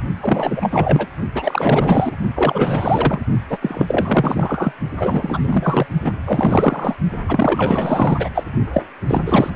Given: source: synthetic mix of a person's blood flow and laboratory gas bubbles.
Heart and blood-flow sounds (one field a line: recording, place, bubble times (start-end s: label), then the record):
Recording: Doppler ultrasound of blood flow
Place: precordium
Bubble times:
0.20-1.06 s: bubbles
1.34-2.16 s: bubbles
2.35-3.22 s: bubbles
3.50-3.58 s: bubbles
3.61-4.72 s: bubbles
4.98-5.40 s: bubbles
5.44-5.86 s: bubbles
6.04-6.12 s: bubbles
6.25-6.96 s: bubbles
7.28-8.29 s: bubbles
8.34-8.44 s: bubbles
8.72-8.85 s: bubbles
9.07-9.21 s: bubbles
9.26-9.50 s: bubbles
From the record:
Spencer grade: 4 (maximum detectable bubble signal sounding continuously throughout systole and diastole of every cardiac period, and overriding the amplitude of the normal cardiac signals)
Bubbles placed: only in the low amplitude regions of the cardiac cycle